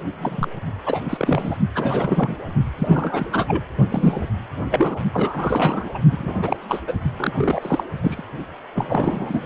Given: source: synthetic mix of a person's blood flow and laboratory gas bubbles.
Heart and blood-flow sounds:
Doppler ultrasound of blood flow; precordium
0.20-0.49 s: bubbles
0.85-1.57 s: bubbles
1.75-2.35 s: bubbles
2.78-3.62 s: bubbles
3.88-4.30 s: bubbles
4.71-5.00 s: bubbles
5.13-5.92 s: bubbles
5.94-5.99 s: bubbles
6.11-6.57 s: bubbles
6.68-6.80 s: bubbles
6.87-6.99 s: bubbles
7.17-7.83 s: bubbles
8.02-8.23 s: bubbles
8.75-9.46 s: bubbles
From the record:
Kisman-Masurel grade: 342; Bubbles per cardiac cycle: rolling drumbeat, 9 or more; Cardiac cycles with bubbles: 100%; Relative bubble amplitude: moderate (0.250 to 0.450); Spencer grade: 3 (all of the cardiac periods contain showers or single bubble signals, but not dominating or overriding the cardiac motion signals); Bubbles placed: only in the low amplitude regions of the cardiac cycle

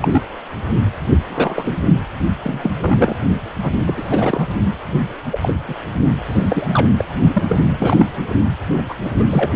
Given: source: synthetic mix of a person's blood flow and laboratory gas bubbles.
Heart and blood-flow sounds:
Doppler ultrasound of blood flow; precordium
0.01-0.22 s: bubbles
1.28-1.81 s: bubbles
2.43-3.16 s: bubbles
3.62-3.71 s: bubbles
3.85-4.47 s: bubbles
5.32-5.55 s: bubbles
5.69-5.76 s: bubbles
6.26-6.93 s: bubbles
6.98-7.05 s: bubbles
7.33-7.43 s: bubbles
7.48-7.64 s: bubbles
7.80-8.06 s: bubbles
8.77-8.82 s: bubbles
8.88-8.94 s: bubbles
9.04-9.11 s: bubbles
9.18-9.25 s: bubbles
9.29-9.53 s: bubbles
From the record:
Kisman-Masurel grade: 243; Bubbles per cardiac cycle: several, 3 to 8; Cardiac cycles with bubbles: 100%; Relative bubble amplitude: loud (0.450 to 0.775); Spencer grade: 3 (all of the cardiac periods contain showers or single bubble signals, but not dominating or overriding the cardiac motion signals); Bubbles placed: only in the low amplitude regions of the cardiac cycle

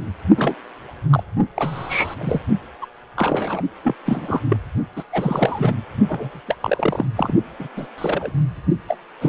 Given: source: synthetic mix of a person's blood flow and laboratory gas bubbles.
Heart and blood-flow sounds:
Doppler ultrasound of blood flow; precordium
0.37-0.54 s: bubbles
1.09-1.23 s: bubbles
1.54-2.15 s: bubbles
2.19-2.41 s: bubbles
2.81-2.85 s: bubbles
3.16-3.62 s: bubbles
3.84-3.95 s: bubbles
4.05-4.40 s: bubbles
4.49-4.56 s: bubbles
4.96-5.03 s: bubbles
5.12-5.77 s: bubbles
6.07-6.40 s: bubbles
6.48-6.55 s: bubbles
6.61-7.05 s: bubbles
7.15-7.34 s: bubbles
7.59-7.68 s: bubbles
7.76-7.87 s: bubbles
7.97-8.32 s: bubbles
8.88-8.96 s: bubbles
9.21-9.29 s: bubbles
From the record:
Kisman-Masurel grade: 242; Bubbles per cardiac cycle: several, 3 to 8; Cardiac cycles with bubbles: 100%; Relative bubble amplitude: moderate (0.250 to 0.450); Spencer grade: 3 (all of the cardiac periods contain showers or single bubble signals, but not dominating or overriding the cardiac motion signals); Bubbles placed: only in the low amplitude regions of the cardiac cycle

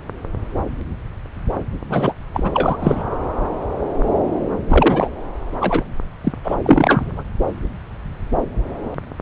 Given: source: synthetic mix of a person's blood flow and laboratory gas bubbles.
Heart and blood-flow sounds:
Doppler ultrasound of blood flow; subclavian vein
1.89-2.14 s: bubbles
2.33-2.49 s: bubbles
2.54-2.77 s: bubbles
2.80-3.04 s: bubbles
4.68-5.08 s: bubbles
5.60-5.84 s: bubbles
6.23-6.33 s: bubbles
6.44-6.55 s: bubbles
6.63-7.23 s: bubbles
From the record:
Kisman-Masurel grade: 233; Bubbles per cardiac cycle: several, 3 to 8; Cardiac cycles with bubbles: 50 to 99%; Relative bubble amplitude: loud (0.450 to 0.775); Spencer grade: 3 (all of the cardiac periods contain showers or single bubble signals, but not dominating or overriding the cardiac motion signals); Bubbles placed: anywhere in the cardiac cycle

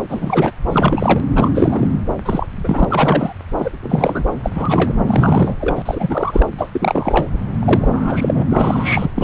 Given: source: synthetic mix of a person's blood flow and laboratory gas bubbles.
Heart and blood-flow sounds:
Doppler ultrasound of blood flow; subclavian vein
0.09-0.51 s: bubbles
0.70-1.22 s: bubbles
1.35-1.50 s: bubbles
1.54-1.88 s: bubbles
2.25-2.47 s: bubbles
2.64-2.85 s: bubbles
2.90-3.33 s: bubbles
3.58-3.71 s: bubbles
3.82-4.24 s: bubbles
4.43-4.50 s: bubbles
4.55-4.94 s: bubbles
5.06-5.55 s: bubbles
5.61-5.82 s: bubbles
5.85-6.46 s: bubbles
6.57-6.70 s: bubbles
6.72-7.29 s: bubbles
7.59-7.88 s: bubbles
7.92-8.44 s: bubbles
8.49-9.11 s: bubbles
9.15-9.24 s: bubbles
From the record:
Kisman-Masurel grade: 342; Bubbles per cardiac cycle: rolling drumbeat, 9 or more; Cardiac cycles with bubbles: 100%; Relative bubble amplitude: moderate (0.250 to 0.450); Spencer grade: 3 (all of the cardiac periods contain showers or single bubble signals, but not dominating or overriding the cardiac motion signals); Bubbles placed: anywhere in the cardiac cycle

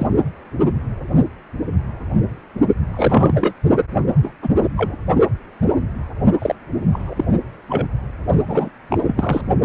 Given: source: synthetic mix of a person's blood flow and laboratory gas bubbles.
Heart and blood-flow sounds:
Doppler ultrasound of blood flow; precordium
0.00-0.07 s: bubbles
2.91-3.54 s: bubbles
4.22-4.34 s: bubbles
4.42-4.49 s: bubbles
4.76-4.96 s: bubbles
6.40-6.56 s: bubbles
6.93-7.24 s: bubbles
7.68-7.88 s: bubbles
8.47-8.70 s: bubbles
8.89-9.41 s: bubbles
From the record:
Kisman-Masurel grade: 233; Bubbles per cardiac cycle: several, 3 to 8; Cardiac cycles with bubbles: 50 to 99%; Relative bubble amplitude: loud (0.450 to 0.775); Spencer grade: 3 (all of the cardiac periods contain showers or single bubble signals, but not dominating or overriding the cardiac motion signals); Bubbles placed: only in the low amplitude regions of the cardiac cycle

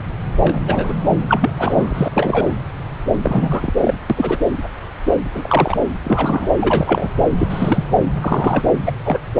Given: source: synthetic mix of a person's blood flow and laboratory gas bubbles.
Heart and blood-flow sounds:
Doppler ultrasound of blood flow; subclavian vein
0.44-0.94 s: bubbles
1.29-1.50 s: bubbles
1.58-2.55 s: bubbles
3.22-3.72 s: bubbles
3.81-3.94 s: bubbles
4.09-4.39 s: bubbles
5.35-5.81 s: bubbles
6.04-7.09 s: bubbles
7.38-7.84 s: bubbles
8.21-8.64 s: bubbles
8.86-8.93 s: bubbles
9.04-9.18 s: bubbles
From the record:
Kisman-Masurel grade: 233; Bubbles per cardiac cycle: several, 3 to 8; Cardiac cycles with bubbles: 50 to 99%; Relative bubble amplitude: loud (0.450 to 0.775); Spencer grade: 3 (all of the cardiac periods contain showers or single bubble signals, but not dominating or overriding the cardiac motion signals); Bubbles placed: anywhere in the cardiac cycle

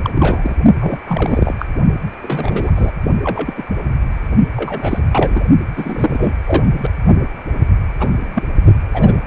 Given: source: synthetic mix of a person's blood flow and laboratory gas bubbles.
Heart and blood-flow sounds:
Doppler ultrasound of blood flow; precordium
0.02-0.10 s: bubbles
0.15-0.56 s: bubbles
0.81-0.98 s: bubbles
1.05-1.54 s: bubbles
1.59-1.66 s: bubbles
2.22-2.71 s: bubbles
2.75-2.91 s: bubbles
3.24-3.54 s: bubbles
3.57-3.63 s: bubbles
4.56-4.99 s: bubbles
5.12-5.44 s: bubbles
5.75-6.33 s: bubbles
6.45-6.71 s: bubbles
6.79-6.91 s: bubbles
7.99-8.09 s: bubbles
8.34-8.43 s: bubbles
8.94-9.16 s: bubbles
From the record:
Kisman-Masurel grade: 243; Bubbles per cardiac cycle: several, 3 to 8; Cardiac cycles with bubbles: 100%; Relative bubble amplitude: loud (0.450 to 0.775); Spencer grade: 3 (all of the cardiac periods contain showers or single bubble signals, but not dominating or overriding the cardiac motion signals); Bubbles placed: only in the low amplitude regions of the cardiac cycle

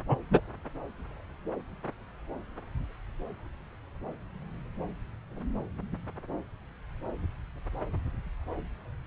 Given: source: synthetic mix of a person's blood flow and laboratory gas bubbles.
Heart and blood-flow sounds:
Doppler ultrasound of blood flow; subclavian vein
0.08-0.17 s: bubbles
0.31-0.40 s: bubbles
From the record:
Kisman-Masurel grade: 112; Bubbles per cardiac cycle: 1 to 2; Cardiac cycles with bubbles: 1 to 10%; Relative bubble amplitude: moderate (0.250 to 0.450); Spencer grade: 1 (occasional bubble signal discernible with the cardiac motion signal, with majority of cardiac periods free of bubbles); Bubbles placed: anywhere in the cardiac cycle

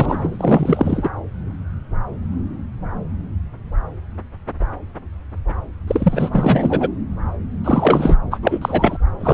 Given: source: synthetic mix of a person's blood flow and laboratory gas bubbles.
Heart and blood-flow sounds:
Doppler ultrasound of blood flow; subclavian vein
0.00-1.10 s: bubbles
5.87-6.89 s: bubbles
7.64-8.16 s: bubbles
8.31-8.38 s: bubbles
8.42-8.98 s: bubbles
9.20-9.34 s: bubbles
From the record:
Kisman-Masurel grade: 333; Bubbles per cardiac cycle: rolling drumbeat, 9 or more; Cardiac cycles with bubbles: 50 to 99%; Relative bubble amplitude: loud (0.450 to 0.775); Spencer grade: 3 (all of the cardiac periods contain showers or single bubble signals, but not dominating or overriding the cardiac motion signals); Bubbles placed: anywhere in the cardiac cycle

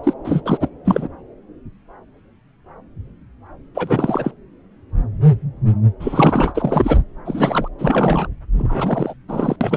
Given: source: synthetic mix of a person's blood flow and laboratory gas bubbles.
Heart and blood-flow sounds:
Doppler ultrasound of blood flow; subclavian vein
0.03-0.13 s: bubbles
0.24-0.41 s: bubbles
0.46-0.57 s: bubbles
0.60-0.68 s: bubbles
0.84-1.08 s: bubbles
3.75-4.31 s: bubbles
6.00-6.52 s: bubbles
6.54-7.00 s: bubbles
7.25-7.68 s: bubbles
7.79-8.28 s: bubbles
8.59-9.14 s: bubbles
9.28-9.56 s: bubbles
9.61-9.77 s: bubbles
From the record:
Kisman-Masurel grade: 333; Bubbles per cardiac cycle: rolling drumbeat, 9 or more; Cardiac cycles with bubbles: 50 to 99%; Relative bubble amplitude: loud (0.450 to 0.775); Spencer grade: 3 (all of the cardiac periods contain showers or single bubble signals, but not dominating or overriding the cardiac motion signals); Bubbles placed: anywhere in the cardiac cycle

